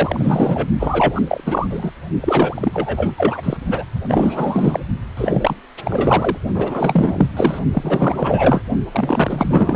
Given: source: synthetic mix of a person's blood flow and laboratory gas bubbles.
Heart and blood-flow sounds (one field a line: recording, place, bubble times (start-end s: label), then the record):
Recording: Doppler ultrasound of blood flow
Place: precordium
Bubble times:
0.00-0.68 s: bubbles
0.79-1.21 s: bubbles
1.28-1.41 s: bubbles
1.46-1.67 s: bubbles
1.70-1.90 s: bubbles
2.20-3.13 s: bubbles
3.17-3.57 s: bubbles
3.68-3.84 s: bubbles
4.08-4.80 s: bubbles
5.17-5.56 s: bubbles
5.84-6.38 s: bubbles
6.54-7.28 s: bubbles
7.36-7.59 s: bubbles
7.71-8.64 s: bubbles
8.92-9.76 s: bubbles
From the record:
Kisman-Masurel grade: 444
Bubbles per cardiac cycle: continuous sound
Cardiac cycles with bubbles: 100%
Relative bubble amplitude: maximal (0.775 to 0.999)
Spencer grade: 4 (maximum detectable bubble signal sounding continuously throughout systole and diastole of every cardiac period, and overriding the amplitude of the normal cardiac signals)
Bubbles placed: only in the low amplitude regions of the cardiac cycle